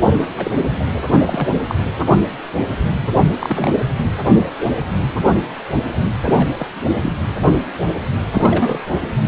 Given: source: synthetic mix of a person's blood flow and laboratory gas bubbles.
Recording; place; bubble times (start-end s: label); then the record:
Doppler ultrasound of blood flow; precordium
0.06-0.31 s: bubbles
0.37-0.55 s: bubbles
0.79-0.84 s: bubbles
1.06-1.20 s: bubbles
1.26-1.48 s: bubbles
1.56-1.61 s: bubbles
1.68-1.75 s: bubbles
3.02-3.07 s: bubbles
3.39-3.71 s: bubbles
6.24-6.48 s: bubbles
6.58-6.67 s: bubbles
7.03-7.12 s: bubbles
8.34-8.87 s: bubbles
From the record:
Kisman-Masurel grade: 232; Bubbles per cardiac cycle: several, 3 to 8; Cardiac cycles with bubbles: 50 to 99%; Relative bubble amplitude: moderate (0.250 to 0.450); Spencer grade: 3 (all of the cardiac periods contain showers or single bubble signals, but not dominating or overriding the cardiac motion signals); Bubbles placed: anywhere in the cardiac cycle